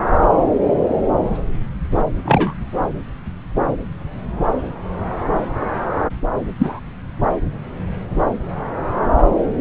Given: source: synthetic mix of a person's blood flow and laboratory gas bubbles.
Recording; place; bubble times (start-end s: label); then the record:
Doppler ultrasound of blood flow; subclavian vein
2.25-2.54 s: bubbles
6.58-6.79 s: bubbles
From the record:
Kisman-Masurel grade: 123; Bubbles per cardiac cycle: 1 to 2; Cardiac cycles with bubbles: 10 to 50%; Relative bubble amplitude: loud (0.450 to 0.775); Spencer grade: 2 (many but less than half of the cardiac periods contain bubble signals, singularly or in groups); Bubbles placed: anywhere in the cardiac cycle